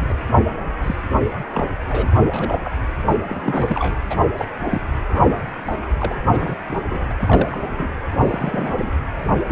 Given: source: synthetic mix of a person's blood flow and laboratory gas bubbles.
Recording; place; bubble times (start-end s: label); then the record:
Doppler ultrasound of blood flow; precordium
0.00-0.14 s: bubbles
0.82-0.95 s: bubbles
1.50-1.70 s: bubbles
1.88-2.16 s: bubbles
2.33-2.59 s: bubbles
2.64-2.70 s: bubbles
3.10-3.17 s: bubbles
3.27-3.94 s: bubbles
4.10-4.15 s: bubbles
4.37-4.46 s: bubbles
4.71-4.82 s: bubbles
5.12-5.44 s: bubbles
5.66-5.76 s: bubbles
5.98-6.16 s: bubbles
6.24-6.56 s: bubbles
6.69-6.77 s: bubbles
6.83-7.04 s: bubbles
7.09-7.61 s: bubbles
7.71-7.89 s: bubbles
8.14-8.90 s: bubbles
9.47-9.51 s: bubbles
From the record:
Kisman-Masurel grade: 242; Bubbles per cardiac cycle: several, 3 to 8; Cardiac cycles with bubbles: 100%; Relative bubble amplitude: moderate (0.250 to 0.450); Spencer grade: 3 (all of the cardiac periods contain showers or single bubble signals, but not dominating or overriding the cardiac motion signals); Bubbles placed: anywhere in the cardiac cycle